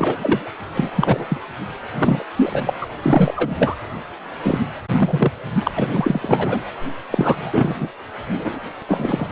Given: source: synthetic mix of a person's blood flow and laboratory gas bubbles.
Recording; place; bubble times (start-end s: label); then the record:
Doppler ultrasound of blood flow; precordium
0.00-0.58 s: bubbles
0.74-0.92 s: bubbles
0.96-1.38 s: bubbles
1.98-2.25 s: bubbles
2.37-2.73 s: bubbles
2.81-2.87 s: bubbles
3.02-3.75 s: bubbles
4.42-4.58 s: bubbles
4.90-5.32 s: bubbles
5.63-5.72 s: bubbles
5.76-6.62 s: bubbles
7.11-7.78 s: bubbles
7.80-7.89 s: bubbles
8.31-8.59 s: bubbles
8.88-9.27 s: bubbles
From the record:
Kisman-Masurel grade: 333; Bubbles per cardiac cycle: rolling drumbeat, 9 or more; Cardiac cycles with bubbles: 50 to 99%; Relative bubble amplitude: loud (0.450 to 0.775); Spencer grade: 3 (all of the cardiac periods contain showers or single bubble signals, but not dominating or overriding the cardiac motion signals); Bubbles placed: anywhere in the cardiac cycle